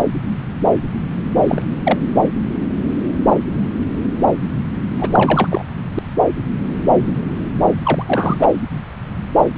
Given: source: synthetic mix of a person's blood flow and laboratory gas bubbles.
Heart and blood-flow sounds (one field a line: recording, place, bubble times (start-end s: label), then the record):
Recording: Doppler ultrasound of blood flow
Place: subclavian vein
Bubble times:
1.47-1.62 s: bubbles
1.84-1.99 s: bubbles
4.99-5.48 s: bubbles
5.50-5.63 s: bubbles
7.83-8.50 s: bubbles
From the record:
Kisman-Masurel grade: 223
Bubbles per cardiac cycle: several, 3 to 8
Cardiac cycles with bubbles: 10 to 50%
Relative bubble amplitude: loud (0.450 to 0.775)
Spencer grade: 2 (many but less than half of the cardiac periods contain bubble signals, singularly or in groups)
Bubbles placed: anywhere in the cardiac cycle